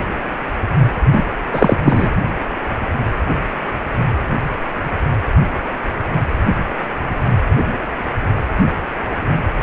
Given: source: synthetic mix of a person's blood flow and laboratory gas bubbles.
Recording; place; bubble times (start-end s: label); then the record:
Doppler ultrasound of blood flow; precordium
1.11-1.34 s: bubbles
1.52-1.77 s: bubbles
1.85-2.10 s: bubbles
From the record:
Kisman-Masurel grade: 213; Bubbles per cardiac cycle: several, 3 to 8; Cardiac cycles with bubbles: 1 to 10%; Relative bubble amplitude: loud (0.450 to 0.775); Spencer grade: 1 (occasional bubble signal discernible with the cardiac motion signal, with majority of cardiac periods free of bubbles); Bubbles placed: anywhere in the cardiac cycle